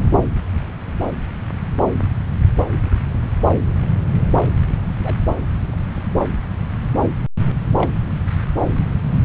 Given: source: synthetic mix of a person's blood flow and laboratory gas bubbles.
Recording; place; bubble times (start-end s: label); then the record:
Doppler ultrasound of blood flow; subclavian vein
0.00-0.06 s: bubbles
5.03-5.16 s: bubbles
7.78-7.91 s: bubbles
From the record:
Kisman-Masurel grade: 121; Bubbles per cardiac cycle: 1 to 2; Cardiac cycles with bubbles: 10 to 50%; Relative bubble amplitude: barely perceptible (0.100 to 0.250); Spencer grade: 2 (many but less than half of the cardiac periods contain bubble signals, singularly or in groups); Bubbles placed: anywhere in the cardiac cycle